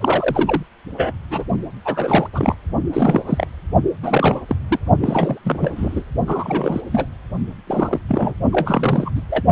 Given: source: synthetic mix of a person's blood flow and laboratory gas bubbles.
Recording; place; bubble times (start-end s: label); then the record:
Doppler ultrasound of blood flow; precordium
0.00-0.63 s: bubbles
0.97-1.14 s: bubbles
1.30-1.44 s: bubbles
1.84-2.27 s: bubbles
2.33-2.56 s: bubbles
2.92-3.22 s: bubbles
3.26-3.47 s: bubbles
4.02-4.41 s: bubbles
4.47-4.56 s: bubbles
4.68-4.79 s: bubbles
5.00-5.41 s: bubbles
5.44-6.04 s: bubbles
6.26-6.81 s: bubbles
6.91-7.06 s: bubbles
7.67-8.02 s: bubbles
8.08-8.34 s: bubbles
8.53-9.12 s: bubbles
9.16-9.21 s: bubbles
9.29-9.44 s: bubbles
From the record:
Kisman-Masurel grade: 342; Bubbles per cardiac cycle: rolling drumbeat, 9 or more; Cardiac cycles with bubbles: 100%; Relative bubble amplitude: moderate (0.250 to 0.450); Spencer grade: 3 (all of the cardiac periods contain showers or single bubble signals, but not dominating or overriding the cardiac motion signals); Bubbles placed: only in the low amplitude regions of the cardiac cycle